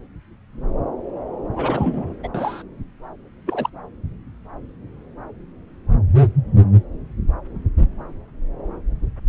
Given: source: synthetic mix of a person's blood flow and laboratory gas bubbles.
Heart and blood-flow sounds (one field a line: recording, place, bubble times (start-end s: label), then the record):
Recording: Doppler ultrasound of blood flow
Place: subclavian vein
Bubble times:
1.53-2.15 s: bubbles
2.23-2.28 s: bubbles
2.34-2.62 s: bubbles
3.46-3.69 s: bubbles
From the record:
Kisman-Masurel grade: 222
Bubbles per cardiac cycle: several, 3 to 8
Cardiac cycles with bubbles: 10 to 50%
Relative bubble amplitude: moderate (0.250 to 0.450)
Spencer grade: 2 (many but less than half of the cardiac periods contain bubble signals, singularly or in groups)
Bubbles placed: anywhere in the cardiac cycle